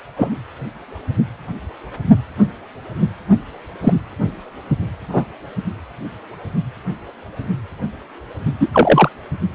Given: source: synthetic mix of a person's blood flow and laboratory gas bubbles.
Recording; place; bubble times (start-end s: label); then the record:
Doppler ultrasound of blood flow; precordium
0.16-0.30 s: bubbles
3.82-3.94 s: bubbles
5.08-5.31 s: bubbles
8.60-8.69 s: bubbles
8.72-9.10 s: bubbles
From the record:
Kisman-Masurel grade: 123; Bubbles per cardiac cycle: 1 to 2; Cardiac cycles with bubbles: 10 to 50%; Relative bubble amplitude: loud (0.450 to 0.775); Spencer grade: 2 (many but less than half of the cardiac periods contain bubble signals, singularly or in groups); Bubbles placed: anywhere in the cardiac cycle